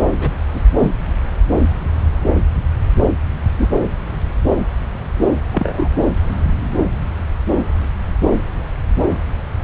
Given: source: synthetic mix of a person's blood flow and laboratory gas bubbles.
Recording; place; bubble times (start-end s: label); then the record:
Doppler ultrasound of blood flow; subclavian vein
0.17-0.31 s: bubbles
0.53-0.61 s: bubbles
0.80-0.91 s: bubbles
3.58-3.70 s: bubbles
5.51-5.89 s: bubbles
From the record:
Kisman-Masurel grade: 122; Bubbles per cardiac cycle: 1 to 2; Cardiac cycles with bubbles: 10 to 50%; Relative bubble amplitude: moderate (0.250 to 0.450); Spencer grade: 2 (many but less than half of the cardiac periods contain bubble signals, singularly or in groups); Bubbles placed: anywhere in the cardiac cycle